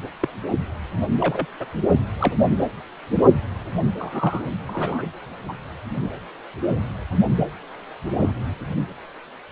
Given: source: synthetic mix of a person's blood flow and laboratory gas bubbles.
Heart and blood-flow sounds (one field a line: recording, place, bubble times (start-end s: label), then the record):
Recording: Doppler ultrasound of blood flow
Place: precordium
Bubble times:
0.20-0.28 s: bubbles
1.21-1.46 s: bubbles
1.59-1.66 s: bubbles
2.19-2.33 s: bubbles
3.97-4.45 s: bubbles
4.67-5.04 s: bubbles
5.48-5.53 s: bubbles
8.21-8.32 s: bubbles
From the record:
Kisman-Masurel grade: 122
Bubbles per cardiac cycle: 1 to 2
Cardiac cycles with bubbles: 10 to 50%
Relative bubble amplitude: moderate (0.250 to 0.450)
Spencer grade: 2 (many but less than half of the cardiac periods contain bubble signals, singularly or in groups)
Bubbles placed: anywhere in the cardiac cycle